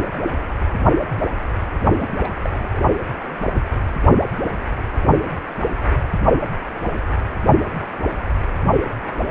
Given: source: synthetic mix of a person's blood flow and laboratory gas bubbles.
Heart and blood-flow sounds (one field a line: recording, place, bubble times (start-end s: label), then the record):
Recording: Doppler ultrasound of blood flow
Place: precordium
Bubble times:
1.99-2.09 s: bubbles
2.23-2.79 s: bubbles
From the record:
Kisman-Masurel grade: 221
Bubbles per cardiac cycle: several, 3 to 8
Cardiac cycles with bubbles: 10 to 50%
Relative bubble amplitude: barely perceptible (0.100 to 0.250)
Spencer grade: 2 (many but less than half of the cardiac periods contain bubble signals, singularly or in groups)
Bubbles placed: only in the low amplitude regions of the cardiac cycle